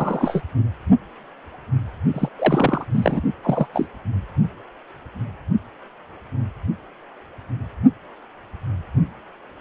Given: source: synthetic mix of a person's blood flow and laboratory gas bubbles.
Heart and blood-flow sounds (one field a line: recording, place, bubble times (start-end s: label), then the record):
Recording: Doppler ultrasound of blood flow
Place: precordium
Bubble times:
0.00-0.41 s: bubbles
2.13-2.29 s: bubbles
2.38-2.85 s: bubbles
2.92-3.21 s: bubbles
3.42-3.66 s: bubbles
3.73-3.88 s: bubbles
From the record:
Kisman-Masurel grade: 222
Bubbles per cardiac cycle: several, 3 to 8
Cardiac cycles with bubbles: 10 to 50%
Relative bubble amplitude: moderate (0.250 to 0.450)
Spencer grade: 2 (many but less than half of the cardiac periods contain bubble signals, singularly or in groups)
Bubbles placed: only in the low amplitude regions of the cardiac cycle